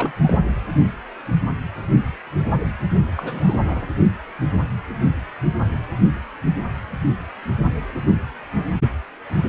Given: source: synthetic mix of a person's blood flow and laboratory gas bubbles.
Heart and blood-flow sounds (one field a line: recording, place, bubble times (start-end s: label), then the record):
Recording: Doppler ultrasound of blood flow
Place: precordium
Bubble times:
0.00-0.12 s: bubbles
0.23-0.39 s: bubbles
2.90-3.04 s: bubbles
3.17-3.58 s: bubbles
3.63-3.87 s: bubbles
From the record:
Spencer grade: 2 (many but less than half of the cardiac periods contain bubble signals, singularly or in groups)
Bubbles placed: anywhere in the cardiac cycle